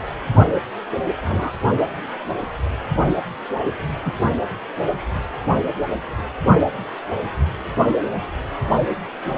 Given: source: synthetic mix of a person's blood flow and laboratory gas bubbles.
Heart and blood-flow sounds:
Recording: Doppler ultrasound of blood flow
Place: precordium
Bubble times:
1.24-1.52 s: bubbles
4.04-4.13 s: bubbles
From the record:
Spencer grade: 2 (many but less than half of the cardiac periods contain bubble signals, singularly or in groups)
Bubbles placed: anywhere in the cardiac cycle

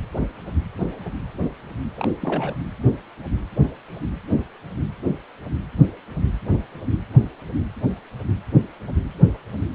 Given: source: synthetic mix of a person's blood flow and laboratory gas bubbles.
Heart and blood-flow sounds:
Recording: Doppler ultrasound of blood flow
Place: precordium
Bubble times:
1.96-2.11 s: bubbles
2.21-2.56 s: bubbles
From the record:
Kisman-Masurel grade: 211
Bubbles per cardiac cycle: several, 3 to 8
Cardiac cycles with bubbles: 1 to 10%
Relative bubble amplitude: barely perceptible (0.100 to 0.250)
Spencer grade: 1 (occasional bubble signal discernible with the cardiac motion signal, with majority of cardiac periods free of bubbles)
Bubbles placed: anywhere in the cardiac cycle

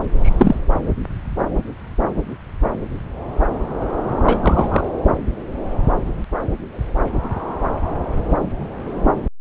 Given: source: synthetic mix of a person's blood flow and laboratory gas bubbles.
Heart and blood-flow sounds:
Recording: Doppler ultrasound of blood flow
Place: subclavian vein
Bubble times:
0.21-0.58 s: bubbles
4.23-4.39 s: bubbles
4.43-4.87 s: bubbles
From the record:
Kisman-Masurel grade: 123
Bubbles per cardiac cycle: 1 to 2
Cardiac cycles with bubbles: 10 to 50%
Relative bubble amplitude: loud (0.450 to 0.775)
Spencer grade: 2 (many but less than half of the cardiac periods contain bubble signals, singularly or in groups)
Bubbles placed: anywhere in the cardiac cycle

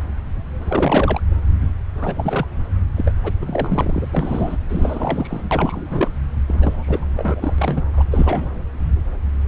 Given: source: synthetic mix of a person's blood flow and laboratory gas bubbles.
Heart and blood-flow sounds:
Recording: Doppler ultrasound of blood flow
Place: subclavian vein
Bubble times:
0.68-1.21 s: bubbles
1.95-2.47 s: bubbles
2.96-3.12 s: bubbles
3.23-3.33 s: bubbles
3.41-4.06 s: bubbles
4.12-4.58 s: bubbles
4.70-6.11 s: bubbles
6.46-7.07 s: bubbles
7.17-7.55 s: bubbles
7.58-7.82 s: bubbles
7.93-8.02 s: bubbles
8.11-8.62 s: bubbles
From the record:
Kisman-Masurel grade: 332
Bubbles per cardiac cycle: rolling drumbeat, 9 or more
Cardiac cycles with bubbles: 50 to 99%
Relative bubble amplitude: moderate (0.250 to 0.450)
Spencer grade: 3 (all of the cardiac periods contain showers or single bubble signals, but not dominating or overriding the cardiac motion signals)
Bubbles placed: anywhere in the cardiac cycle

